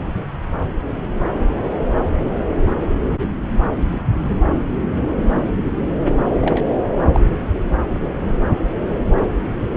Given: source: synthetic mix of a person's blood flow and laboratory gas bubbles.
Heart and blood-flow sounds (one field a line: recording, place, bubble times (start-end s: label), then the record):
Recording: Doppler ultrasound of blood flow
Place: subclavian vein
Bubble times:
6.41-6.65 s: bubbles
7.14-7.20 s: bubbles
From the record:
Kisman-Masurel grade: 112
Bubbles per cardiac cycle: 1 to 2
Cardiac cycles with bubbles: 1 to 10%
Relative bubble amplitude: moderate (0.250 to 0.450)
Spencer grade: 1 (occasional bubble signal discernible with the cardiac motion signal, with majority of cardiac periods free of bubbles)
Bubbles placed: anywhere in the cardiac cycle